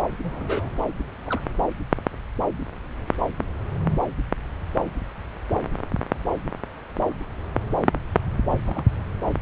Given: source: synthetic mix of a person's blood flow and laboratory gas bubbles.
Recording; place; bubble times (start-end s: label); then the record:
Doppler ultrasound of blood flow; subclavian vein
0.22-0.70 s: bubbles
1.26-1.40 s: bubbles
8.46-8.51 s: bubbles
8.54-8.84 s: bubbles
From the record:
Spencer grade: 2 (many but less than half of the cardiac periods contain bubble signals, singularly or in groups); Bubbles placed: anywhere in the cardiac cycle